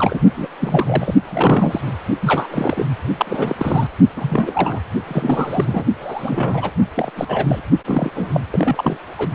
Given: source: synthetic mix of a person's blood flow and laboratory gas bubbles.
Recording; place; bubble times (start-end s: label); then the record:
Doppler ultrasound of blood flow; precordium
0.00-0.22 s: bubbles
0.36-0.47 s: bubbles
0.60-1.15 s: bubbles
1.25-1.81 s: bubbles
1.86-1.92 s: bubbles
2.21-2.47 s: bubbles
2.50-2.85 s: bubbles
3.19-3.87 s: bubbles
4.16-4.79 s: bubbles
5.06-5.84 s: bubbles
6.00-6.71 s: bubbles
6.96-7.10 s: bubbles
7.16-7.62 s: bubbles
7.84-8.11 s: bubbles
8.16-8.41 s: bubbles
8.51-8.97 s: bubbles
9.17-9.29 s: bubbles
From the record:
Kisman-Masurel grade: 342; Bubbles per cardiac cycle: rolling drumbeat, 9 or more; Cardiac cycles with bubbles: 100%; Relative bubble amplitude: moderate (0.250 to 0.450); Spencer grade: 3 (all of the cardiac periods contain showers or single bubble signals, but not dominating or overriding the cardiac motion signals); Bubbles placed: only in the low amplitude regions of the cardiac cycle